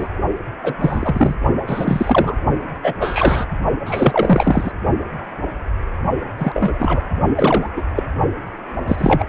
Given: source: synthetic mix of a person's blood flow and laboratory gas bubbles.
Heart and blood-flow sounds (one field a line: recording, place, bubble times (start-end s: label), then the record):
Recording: Doppler ultrasound of blood flow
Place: precordium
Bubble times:
0.00-0.08 s: bubbles
0.63-0.75 s: bubbles
0.81-1.35 s: bubbles
1.67-2.36 s: bubbles
2.83-2.94 s: bubbles
3.00-3.45 s: bubbles
3.85-4.72 s: bubbles
6.38-7.02 s: bubbles
7.35-7.70 s: bubbles
7.76-7.82 s: bubbles
7.96-8.04 s: bubbles
8.88-9.25 s: bubbles
From the record:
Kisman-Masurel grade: 233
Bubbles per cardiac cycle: several, 3 to 8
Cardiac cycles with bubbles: 50 to 99%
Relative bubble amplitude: loud (0.450 to 0.775)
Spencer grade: 3 (all of the cardiac periods contain showers or single bubble signals, but not dominating or overriding the cardiac motion signals)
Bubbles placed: only in the low amplitude regions of the cardiac cycle